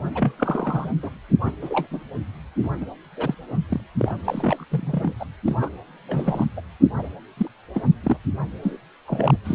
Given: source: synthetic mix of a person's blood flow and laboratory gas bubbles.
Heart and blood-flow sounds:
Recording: Doppler ultrasound of blood flow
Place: precordium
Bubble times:
0.15-0.35 s: bubbles
0.38-0.90 s: bubbles
1.02-1.10 s: bubbles
1.45-1.53 s: bubbles
1.61-1.88 s: bubbles
1.91-2.00 s: bubbles
2.62-2.69 s: bubbles
2.81-2.86 s: bubbles
3.17-3.34 s: bubbles
3.69-3.80 s: bubbles
3.99-4.14 s: bubbles
4.25-4.64 s: bubbles
4.71-5.12 s: bubbles
5.20-5.25 s: bubbles
5.45-5.71 s: bubbles
6.08-6.46 s: bubbles
6.56-6.61 s: bubbles
6.97-7.08 s: bubbles
7.37-7.49 s: bubbles
7.74-7.83 s: bubbles
8.03-8.17 s: bubbles
8.62-8.78 s: bubbles
9.08-9.37 s: bubbles
9.45-9.55 s: bubbles
From the record:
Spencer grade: 3 (all of the cardiac periods contain showers or single bubble signals, but not dominating or overriding the cardiac motion signals)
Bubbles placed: anywhere in the cardiac cycle

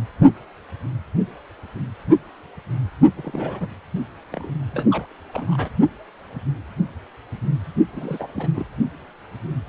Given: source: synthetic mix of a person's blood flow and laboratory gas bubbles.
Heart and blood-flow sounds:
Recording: Doppler ultrasound of blood flow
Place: precordium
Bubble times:
3.17-3.69 s: bubbles
4.32-4.52 s: bubbles
4.72-5.07 s: bubbles
5.11-5.12 s: bubbles
5.33-5.69 s: bubbles
7.93-8.65 s: bubbles
From the record:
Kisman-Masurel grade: 221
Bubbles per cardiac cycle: several, 3 to 8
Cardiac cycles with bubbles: 10 to 50%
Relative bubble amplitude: barely perceptible (0.100 to 0.250)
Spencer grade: 2 (many but less than half of the cardiac periods contain bubble signals, singularly or in groups)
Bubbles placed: only in the low amplitude regions of the cardiac cycle

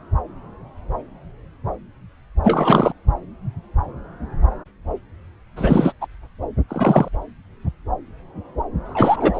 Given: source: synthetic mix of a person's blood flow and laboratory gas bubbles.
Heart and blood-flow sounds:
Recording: Doppler ultrasound of blood flow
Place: subclavian vein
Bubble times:
2.43-2.93 s: bubbles
5.56-5.92 s: bubbles
6.00-6.06 s: bubbles
6.68-7.08 s: bubbles
8.85-9.40 s: bubbles
From the record:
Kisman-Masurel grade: 223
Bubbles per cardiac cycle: several, 3 to 8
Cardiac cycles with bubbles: 10 to 50%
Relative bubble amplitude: loud (0.450 to 0.775)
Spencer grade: 2 (many but less than half of the cardiac periods contain bubble signals, singularly or in groups)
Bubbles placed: anywhere in the cardiac cycle

